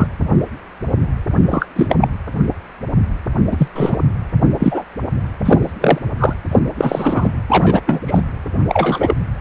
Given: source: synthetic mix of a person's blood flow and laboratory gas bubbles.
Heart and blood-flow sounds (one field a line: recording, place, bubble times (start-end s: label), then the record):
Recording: Doppler ultrasound of blood flow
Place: precordium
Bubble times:
0.00-0.07 s: bubbles
1.48-1.66 s: bubbles
1.75-1.95 s: bubbles
2.01-2.08 s: bubbles
3.46-3.68 s: bubbles
3.75-3.97 s: bubbles
4.59-4.84 s: bubbles
5.45-5.71 s: bubbles
5.80-5.99 s: bubbles
6.19-6.33 s: bubbles
6.51-6.59 s: bubbles
6.77-7.32 s: bubbles
7.49-7.81 s: bubbles
7.87-8.02 s: bubbles
8.07-8.21 s: bubbles
8.69-9.14 s: bubbles
From the record:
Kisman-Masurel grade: 233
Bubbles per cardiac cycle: several, 3 to 8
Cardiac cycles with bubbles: 50 to 99%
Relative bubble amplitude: loud (0.450 to 0.775)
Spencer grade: 3 (all of the cardiac periods contain showers or single bubble signals, but not dominating or overriding the cardiac motion signals)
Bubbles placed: anywhere in the cardiac cycle